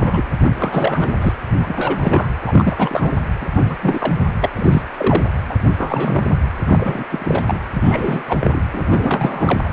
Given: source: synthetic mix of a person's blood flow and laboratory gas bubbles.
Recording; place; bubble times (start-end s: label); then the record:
Doppler ultrasound of blood flow; precordium
0.00-0.23 s: bubbles
0.43-0.52 s: bubbles
0.58-1.33 s: bubbles
1.56-2.29 s: bubbles
2.46-3.12 s: bubbles
3.41-3.46 s: bubbles
3.55-3.75 s: bubbles
3.83-4.15 s: bubbles
4.41-4.52 s: bubbles
4.56-4.82 s: bubbles
4.98-5.24 s: bubbles
5.49-5.55 s: bubbles
5.78-6.38 s: bubbles
6.66-7.04 s: bubbles
7.10-7.59 s: bubbles
7.73-8.22 s: bubbles
8.28-8.38 s: bubbles
8.40-8.60 s: bubbles
8.71-9.59 s: bubbles
9.64-9.69 s: bubbles
From the record:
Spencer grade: 3 (all of the cardiac periods contain showers or single bubble signals, but not dominating or overriding the cardiac motion signals); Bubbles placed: anywhere in the cardiac cycle